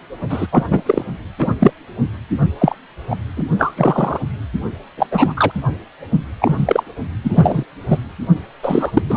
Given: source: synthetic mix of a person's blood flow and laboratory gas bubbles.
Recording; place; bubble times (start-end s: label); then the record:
Doppler ultrasound of blood flow; precordium
0.29-0.46 s: bubbles
0.52-0.64 s: bubbles
0.70-0.81 s: bubbles
0.85-1.04 s: bubbles
1.38-1.54 s: bubbles
1.58-1.72 s: bubbles
2.59-2.75 s: bubbles
3.10-3.16 s: bubbles
3.37-3.45 s: bubbles
3.58-3.73 s: bubbles
3.77-4.19 s: bubbles
4.97-5.06 s: bubbles
5.11-5.34 s: bubbles
5.36-5.51 s: bubbles
6.42-6.83 s: bubbles
7.23-7.63 s: bubbles
7.90-7.97 s: bubbles
8.62-9.02 s: bubbles
9.09-9.17 s: bubbles
From the record:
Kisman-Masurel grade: 243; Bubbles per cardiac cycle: several, 3 to 8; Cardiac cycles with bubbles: 100%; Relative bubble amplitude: loud (0.450 to 0.775); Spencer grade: 3 (all of the cardiac periods contain showers or single bubble signals, but not dominating or overriding the cardiac motion signals); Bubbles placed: only in the low amplitude regions of the cardiac cycle